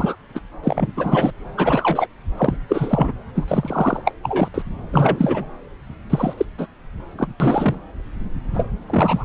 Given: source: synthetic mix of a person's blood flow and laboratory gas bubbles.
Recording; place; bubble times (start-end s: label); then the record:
Doppler ultrasound of blood flow; subclavian vein
0.00-0.15 s: bubbles
0.35-0.40 s: bubbles
0.64-0.93 s: bubbles
0.96-1.31 s: bubbles
1.57-2.07 s: bubbles
2.37-2.56 s: bubbles
2.69-3.13 s: bubbles
3.35-4.00 s: bubbles
4.04-4.12 s: bubbles
4.23-4.48 s: bubbles
4.54-4.62 s: bubbles
4.92-5.46 s: bubbles
6.09-6.33 s: bubbles
6.37-6.46 s: bubbles
6.57-6.67 s: bubbles
7.17-7.27 s: bubbles
7.40-7.79 s: bubbles
8.54-8.65 s: bubbles
8.86-9.25 s: bubbles
From the record:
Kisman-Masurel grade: 243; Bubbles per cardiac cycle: several, 3 to 8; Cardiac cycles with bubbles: 100%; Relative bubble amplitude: loud (0.450 to 0.775); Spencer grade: 3 (all of the cardiac periods contain showers or single bubble signals, but not dominating or overriding the cardiac motion signals); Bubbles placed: anywhere in the cardiac cycle